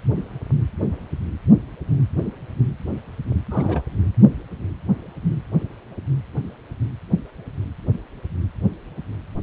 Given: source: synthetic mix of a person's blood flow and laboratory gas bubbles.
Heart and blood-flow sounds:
Doppler ultrasound of blood flow; precordium
3.50-3.83 s: bubbles
From the record:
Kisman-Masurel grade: 211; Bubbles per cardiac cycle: several, 3 to 8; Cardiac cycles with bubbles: 1 to 10%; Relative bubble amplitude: barely perceptible (0.100 to 0.250); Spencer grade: 1 (occasional bubble signal discernible with the cardiac motion signal, with majority of cardiac periods free of bubbles); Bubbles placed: anywhere in the cardiac cycle

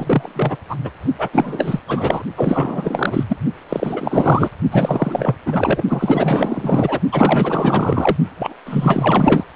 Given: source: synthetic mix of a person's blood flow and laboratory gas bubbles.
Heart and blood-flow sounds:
Doppler ultrasound of blood flow; precordium
0.00-0.56 s: bubbles
0.69-0.76 s: bubbles
0.84-0.91 s: bubbles
1.18-1.28 s: bubbles
1.32-1.80 s: bubbles
1.87-2.23 s: bubbles
2.36-3.24 s: bubbles
3.29-3.37 s: bubbles
3.69-4.49 s: bubbles
4.72-5.36 s: bubbles
5.46-5.83 s: bubbles
5.88-7.00 s: bubbles
7.12-8.17 s: bubbles
8.38-8.54 s: bubbles
8.65-9.44 s: bubbles
From the record:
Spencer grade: 4 (maximum detectable bubble signal sounding continuously throughout systole and diastole of every cardiac period, and overriding the amplitude of the normal cardiac signals); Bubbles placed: only in the low amplitude regions of the cardiac cycle

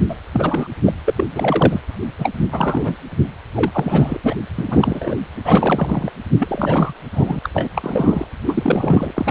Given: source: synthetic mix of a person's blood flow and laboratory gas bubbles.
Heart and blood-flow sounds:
Doppler ultrasound of blood flow; precordium
0.08-0.16 s: bubbles
0.33-0.68 s: bubbles
0.85-0.94 s: bubbles
1.06-1.14 s: bubbles
1.17-1.25 s: bubbles
1.32-1.80 s: bubbles
2.17-2.31 s: bubbles
2.38-2.44 s: bubbles
2.51-2.96 s: bubbles
3.55-4.18 s: bubbles
4.23-4.37 s: bubbles
4.57-5.17 s: bubbles
5.44-6.12 s: bubbles
6.40-6.94 s: bubbles
7.13-7.39 s: bubbles
7.43-7.50 s: bubbles
7.54-7.68 s: bubbles
7.75-8.27 s: bubbles
8.46-9.11 s: bubbles
9.13-9.31 s: bubbles
From the record:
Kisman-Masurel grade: 343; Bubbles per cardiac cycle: rolling drumbeat, 9 or more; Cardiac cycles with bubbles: 100%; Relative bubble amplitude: loud (0.450 to 0.775); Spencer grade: 3 (all of the cardiac periods contain showers or single bubble signals, but not dominating or overriding the cardiac motion signals); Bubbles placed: anywhere in the cardiac cycle

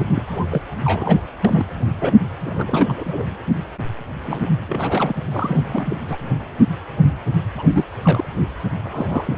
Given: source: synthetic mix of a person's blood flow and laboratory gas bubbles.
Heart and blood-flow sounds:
Doppler ultrasound of blood flow; precordium
0.00-0.04 s: bubbles
0.08-0.22 s: bubbles
0.27-0.46 s: bubbles
0.50-0.62 s: bubbles
0.84-1.27 s: bubbles
1.44-1.72 s: bubbles
1.99-2.15 s: bubbles
2.44-3.26 s: bubbles
4.25-4.46 s: bubbles
4.68-5.15 s: bubbles
5.31-6.00 s: bubbles
6.08-6.17 s: bubbles
7.56-7.85 s: bubbles
8.03-8.28 s: bubbles
8.83-9.38 s: bubbles
From the record:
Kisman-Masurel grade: 332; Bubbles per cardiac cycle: rolling drumbeat, 9 or more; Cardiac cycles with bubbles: 50 to 99%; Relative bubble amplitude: moderate (0.250 to 0.450); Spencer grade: 3 (all of the cardiac periods contain showers or single bubble signals, but not dominating or overriding the cardiac motion signals); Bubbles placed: anywhere in the cardiac cycle

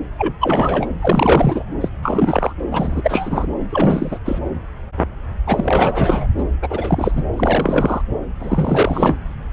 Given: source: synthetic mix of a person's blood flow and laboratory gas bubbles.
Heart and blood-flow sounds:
Doppler ultrasound of blood flow; subclavian vein
0.18-0.34 s: bubbles
0.40-0.86 s: bubbles
1.01-1.63 s: bubbles
1.81-1.88 s: bubbles
2.02-2.54 s: bubbles
2.71-3.46 s: bubbles
3.69-4.18 s: bubbles
4.25-4.38 s: bubbles
5.46-6.27 s: bubbles
6.38-6.44 s: bubbles
6.62-7.22 s: bubbles
7.33-8.02 s: bubbles
8.40-9.16 s: bubbles
From the record:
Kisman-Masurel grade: 333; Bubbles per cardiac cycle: rolling drumbeat, 9 or more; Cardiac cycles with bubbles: 50 to 99%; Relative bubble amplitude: loud (0.450 to 0.775); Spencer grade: 3 (all of the cardiac periods contain showers or single bubble signals, but not dominating or overriding the cardiac motion signals); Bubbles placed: anywhere in the cardiac cycle

